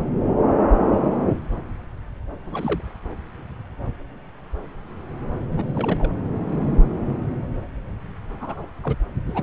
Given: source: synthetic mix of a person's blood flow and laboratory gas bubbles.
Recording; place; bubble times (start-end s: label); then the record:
Doppler ultrasound of blood flow; subclavian vein
2.46-2.80 s: bubbles
5.51-6.09 s: bubbles
8.40-8.67 s: bubbles
8.83-8.96 s: bubbles
9.27-9.43 s: bubbles
From the record:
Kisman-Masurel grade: 221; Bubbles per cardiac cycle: several, 3 to 8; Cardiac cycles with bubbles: 10 to 50%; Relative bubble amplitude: barely perceptible (0.100 to 0.250); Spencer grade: 2 (many but less than half of the cardiac periods contain bubble signals, singularly or in groups); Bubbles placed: anywhere in the cardiac cycle